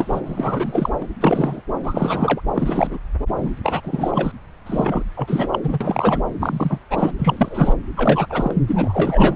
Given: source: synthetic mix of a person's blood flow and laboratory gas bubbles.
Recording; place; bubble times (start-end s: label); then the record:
Doppler ultrasound of blood flow; subclavian vein
0.00-0.20 s: bubbles
0.26-0.90 s: bubbles
1.01-1.04 s: bubbles
1.21-1.61 s: bubbles
1.83-2.41 s: bubbles
2.54-2.98 s: bubbles
3.36-3.50 s: bubbles
3.63-3.81 s: bubbles
3.83-4.31 s: bubbles
4.66-5.03 s: bubbles
5.15-5.48 s: bubbles
5.52-5.59 s: bubbles
5.63-6.21 s: bubbles
6.40-6.78 s: bubbles
6.90-7.12 s: bubbles
7.19-7.73 s: bubbles
7.96-8.27 s: bubbles
8.29-8.54 s: bubbles
8.67-9.36 s: bubbles
From the record:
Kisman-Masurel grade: 342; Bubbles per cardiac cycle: rolling drumbeat, 9 or more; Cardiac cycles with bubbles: 100%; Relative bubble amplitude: moderate (0.250 to 0.450); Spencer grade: 3 (all of the cardiac periods contain showers or single bubble signals, but not dominating or overriding the cardiac motion signals); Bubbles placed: anywhere in the cardiac cycle